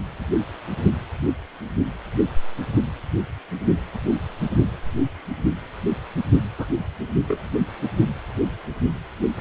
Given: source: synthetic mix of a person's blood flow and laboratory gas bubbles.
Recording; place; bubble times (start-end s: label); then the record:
Doppler ultrasound of blood flow; precordium
6.58-6.67 s: bubbles
7.28-7.49 s: bubbles
From the record:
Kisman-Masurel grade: 112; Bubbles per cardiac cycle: 1 to 2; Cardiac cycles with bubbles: 1 to 10%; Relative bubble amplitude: moderate (0.250 to 0.450); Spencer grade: 1 (occasional bubble signal discernible with the cardiac motion signal, with majority of cardiac periods free of bubbles); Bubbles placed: anywhere in the cardiac cycle